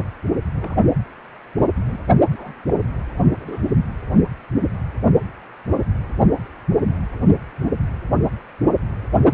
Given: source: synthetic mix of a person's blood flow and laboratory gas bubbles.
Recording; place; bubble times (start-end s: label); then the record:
Doppler ultrasound of blood flow; precordium
0.56-0.76 s: bubbles
1.86-1.99 s: bubbles
2.30-2.53 s: bubbles
2.67-2.73 s: bubbles
3.37-3.61 s: bubbles
From the record:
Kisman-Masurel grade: 121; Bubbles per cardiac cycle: 1 to 2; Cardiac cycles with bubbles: 10 to 50%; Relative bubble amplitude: barely perceptible (0.100 to 0.250); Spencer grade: 2 (many but less than half of the cardiac periods contain bubble signals, singularly or in groups); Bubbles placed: only in the low amplitude regions of the cardiac cycle